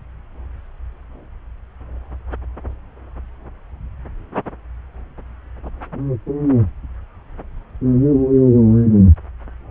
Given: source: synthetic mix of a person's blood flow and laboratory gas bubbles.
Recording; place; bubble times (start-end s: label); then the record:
Doppler ultrasound of blood flow; subclavian vein
no bubbles
From the record:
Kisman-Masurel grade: 000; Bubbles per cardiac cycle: 0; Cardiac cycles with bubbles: 0%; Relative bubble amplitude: no bubbles discernible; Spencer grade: 0 (complete lack of bubble signals)